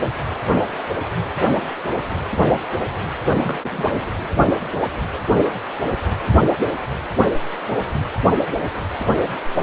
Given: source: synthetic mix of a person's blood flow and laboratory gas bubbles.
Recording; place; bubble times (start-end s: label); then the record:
Doppler ultrasound of blood flow; precordium
3.24-3.38 s: bubbles
3.42-3.59 s: bubbles
3.61-4.07 s: bubbles
From the record:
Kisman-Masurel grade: 212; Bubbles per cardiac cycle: several, 3 to 8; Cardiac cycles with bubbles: 1 to 10%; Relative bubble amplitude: moderate (0.250 to 0.450); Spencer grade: 1 (occasional bubble signal discernible with the cardiac motion signal, with majority of cardiac periods free of bubbles); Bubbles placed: anywhere in the cardiac cycle